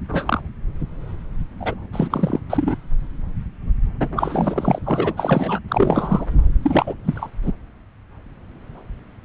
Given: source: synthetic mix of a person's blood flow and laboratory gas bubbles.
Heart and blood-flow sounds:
Doppler ultrasound of blood flow; subclavian vein
0.09-0.40 s: bubbles
1.60-1.75 s: bubbles
1.93-2.40 s: bubbles
2.50-2.75 s: bubbles
4.00-4.08 s: bubbles
4.16-4.79 s: bubbles
4.84-5.13 s: bubbles
5.17-5.59 s: bubbles
5.68-6.26 s: bubbles
6.63-6.94 s: bubbles
7.04-7.29 s: bubbles
7.42-7.52 s: bubbles
From the record:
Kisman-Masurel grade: 332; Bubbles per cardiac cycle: rolling drumbeat, 9 or more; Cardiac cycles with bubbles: 50 to 99%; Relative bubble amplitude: moderate (0.250 to 0.450); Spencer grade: 3 (all of the cardiac periods contain showers or single bubble signals, but not dominating or overriding the cardiac motion signals); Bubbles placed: anywhere in the cardiac cycle

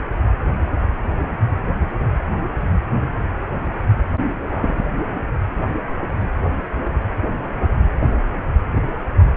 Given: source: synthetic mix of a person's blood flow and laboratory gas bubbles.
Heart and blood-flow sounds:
Doppler ultrasound of blood flow; precordium
4.46-4.85 s: bubbles
From the record:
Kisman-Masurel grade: 113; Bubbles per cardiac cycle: 1 to 2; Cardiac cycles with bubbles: 1 to 10%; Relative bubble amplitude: loud (0.450 to 0.775); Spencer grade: 1 (occasional bubble signal discernible with the cardiac motion signal, with majority of cardiac periods free of bubbles); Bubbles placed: only in the low amplitude regions of the cardiac cycle

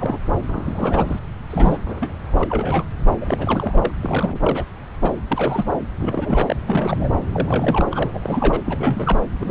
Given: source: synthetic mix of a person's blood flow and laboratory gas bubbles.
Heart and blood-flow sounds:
Doppler ultrasound of blood flow; subclavian vein
0.00-0.18 s: bubbles
0.47-1.19 s: bubbles
1.50-1.79 s: bubbles
1.86-2.12 s: bubbles
2.28-2.83 s: bubbles
3.21-3.91 s: bubbles
4.02-4.64 s: bubbles
5.01-5.16 s: bubbles
5.29-5.71 s: bubbles
5.98-6.56 s: bubbles
6.67-7.09 s: bubbles
7.33-7.86 s: bubbles
7.90-8.60 s: bubbles
8.65-9.19 s: bubbles
9.37-9.51 s: bubbles
From the record:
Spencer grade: 3 (all of the cardiac periods contain showers or single bubble signals, but not dominating or overriding the cardiac motion signals); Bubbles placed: anywhere in the cardiac cycle

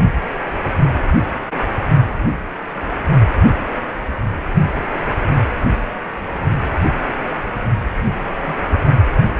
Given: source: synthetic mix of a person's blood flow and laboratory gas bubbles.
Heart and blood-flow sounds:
Doppler ultrasound of blood flow; precordium
8.23-8.31 s: bubbles
8.41-8.56 s: bubbles
8.61-8.78 s: bubbles
From the record:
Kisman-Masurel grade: 221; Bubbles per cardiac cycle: several, 3 to 8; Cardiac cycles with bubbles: 10 to 50%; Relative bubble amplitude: barely perceptible (0.100 to 0.250); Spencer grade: 2 (many but less than half of the cardiac periods contain bubble signals, singularly or in groups); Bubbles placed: anywhere in the cardiac cycle

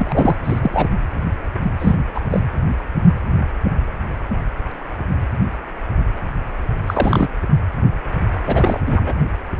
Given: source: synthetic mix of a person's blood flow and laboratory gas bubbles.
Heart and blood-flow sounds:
Doppler ultrasound of blood flow; precordium
0.00-0.36 s: bubbles
0.44-0.88 s: bubbles
1.79-1.95 s: bubbles
2.15-2.22 s: bubbles
2.30-2.40 s: bubbles
6.87-7.29 s: bubbles
8.46-9.14 s: bubbles
From the record:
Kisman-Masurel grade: 223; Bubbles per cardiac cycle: several, 3 to 8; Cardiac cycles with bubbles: 10 to 50%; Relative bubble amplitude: loud (0.450 to 0.775); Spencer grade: 2 (many but less than half of the cardiac periods contain bubble signals, singularly or in groups); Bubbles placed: anywhere in the cardiac cycle

